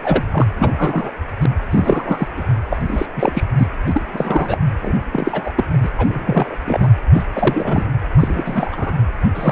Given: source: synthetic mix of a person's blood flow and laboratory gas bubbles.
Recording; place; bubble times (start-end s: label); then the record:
Doppler ultrasound of blood flow; precordium
0.03-0.24 s: bubbles
0.31-0.46 s: bubbles
0.57-1.11 s: bubbles
1.42-1.46 s: bubbles
1.71-2.28 s: bubbles
2.37-2.45 s: bubbles
2.68-3.06 s: bubbles
3.16-3.43 s: bubbles
3.58-3.67 s: bubbles
3.86-4.03 s: bubbles
4.12-4.58 s: bubbles
4.81-4.93 s: bubbles
5.12-5.53 s: bubbles
5.56-5.64 s: bubbles
5.72-5.77 s: bubbles
5.83-5.89 s: bubbles
5.97-6.55 s: bubbles
6.67-6.90 s: bubbles
7.12-7.23 s: bubbles
7.33-7.90 s: bubbles
8.17-8.93 s: bubbles
9.35-9.52 s: bubbles
From the record:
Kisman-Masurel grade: 342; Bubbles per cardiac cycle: rolling drumbeat, 9 or more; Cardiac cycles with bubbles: 100%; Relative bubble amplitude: moderate (0.250 to 0.450); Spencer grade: 3 (all of the cardiac periods contain showers or single bubble signals, but not dominating or overriding the cardiac motion signals); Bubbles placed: anywhere in the cardiac cycle